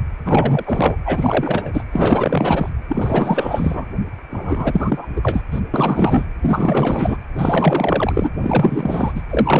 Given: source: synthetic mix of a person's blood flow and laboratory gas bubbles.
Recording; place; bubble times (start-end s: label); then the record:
Doppler ultrasound of blood flow; precordium
0.25-0.96 s: bubbles
1.05-1.84 s: bubbles
1.92-2.69 s: bubbles
2.88-3.85 s: bubbles
4.30-5.08 s: bubbles
5.16-5.43 s: bubbles
5.51-5.60 s: bubbles
5.74-6.25 s: bubbles
6.43-7.18 s: bubbles
7.35-8.29 s: bubbles
8.37-9.12 s: bubbles
9.15-9.21 s: bubbles
9.30-9.60 s: bubbles
From the record:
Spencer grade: 4 (maximum detectable bubble signal sounding continuously throughout systole and diastole of every cardiac period, and overriding the amplitude of the normal cardiac signals); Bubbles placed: anywhere in the cardiac cycle